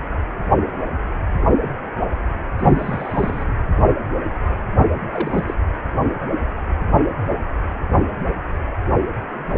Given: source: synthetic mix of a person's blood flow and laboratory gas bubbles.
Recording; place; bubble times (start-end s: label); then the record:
Doppler ultrasound of blood flow; precordium
2.58-3.54 s: bubbles
5.12-5.54 s: bubbles
From the record:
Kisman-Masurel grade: 221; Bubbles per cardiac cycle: several, 3 to 8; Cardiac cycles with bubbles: 10 to 50%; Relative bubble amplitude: barely perceptible (0.100 to 0.250); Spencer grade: 2 (many but less than half of the cardiac periods contain bubble signals, singularly or in groups); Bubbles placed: anywhere in the cardiac cycle